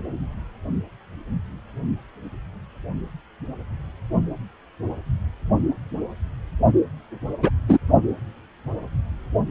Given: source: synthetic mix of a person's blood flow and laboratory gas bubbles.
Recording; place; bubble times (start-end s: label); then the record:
Doppler ultrasound of blood flow; precordium
7.42-7.50 s: bubbles
7.69-7.78 s: bubbles
From the record:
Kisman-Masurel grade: 113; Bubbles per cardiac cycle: 1 to 2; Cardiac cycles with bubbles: 1 to 10%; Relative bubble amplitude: loud (0.450 to 0.775); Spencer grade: 1 (occasional bubble signal discernible with the cardiac motion signal, with majority of cardiac periods free of bubbles); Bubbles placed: only in the low amplitude regions of the cardiac cycle